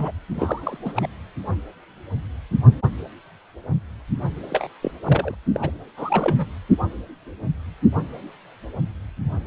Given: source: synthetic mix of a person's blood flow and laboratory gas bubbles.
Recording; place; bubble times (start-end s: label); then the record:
Doppler ultrasound of blood flow; precordium
0.00-0.11 s: bubbles
0.32-0.78 s: bubbles
0.84-0.92 s: bubbles
0.95-1.07 s: bubbles
4.50-4.67 s: bubbles
4.82-4.91 s: bubbles
5.04-5.34 s: bubbles
5.54-5.71 s: bubbles
5.97-6.36 s: bubbles
6.38-6.46 s: bubbles
From the record:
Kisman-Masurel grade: 222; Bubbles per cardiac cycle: several, 3 to 8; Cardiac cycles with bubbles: 10 to 50%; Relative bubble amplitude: moderate (0.250 to 0.450); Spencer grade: 2 (many but less than half of the cardiac periods contain bubble signals, singularly or in groups); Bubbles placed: anywhere in the cardiac cycle